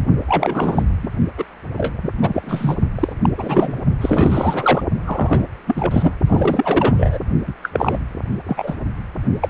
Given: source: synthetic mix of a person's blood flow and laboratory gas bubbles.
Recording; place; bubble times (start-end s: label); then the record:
Doppler ultrasound of blood flow; precordium
0.28-0.84 s: bubbles
1.02-1.08 s: bubbles
1.38-1.45 s: bubbles
1.75-2.08 s: bubbles
2.21-2.76 s: bubbles
2.95-3.12 s: bubbles
3.23-3.29 s: bubbles
3.37-3.79 s: bubbles
4.00-4.83 s: bubbles
5.05-5.46 s: bubbles
5.67-6.15 s: bubbles
6.26-7.18 s: bubbles
7.46-7.54 s: bubbles
7.62-7.70 s: bubbles
7.73-7.98 s: bubbles
8.30-8.37 s: bubbles
8.46-8.75 s: bubbles
9.41-9.49 s: bubbles
From the record:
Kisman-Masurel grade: 343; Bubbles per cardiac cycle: rolling drumbeat, 9 or more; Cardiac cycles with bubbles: 100%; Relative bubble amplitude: loud (0.450 to 0.775); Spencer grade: 3 (all of the cardiac periods contain showers or single bubble signals, but not dominating or overriding the cardiac motion signals); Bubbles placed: only in the low amplitude regions of the cardiac cycle